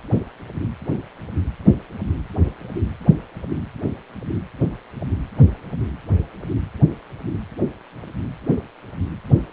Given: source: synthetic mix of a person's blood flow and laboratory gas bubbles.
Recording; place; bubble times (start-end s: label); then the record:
Doppler ultrasound of blood flow; precordium
no bubbles
From the record:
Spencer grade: 0 (complete lack of bubble signals)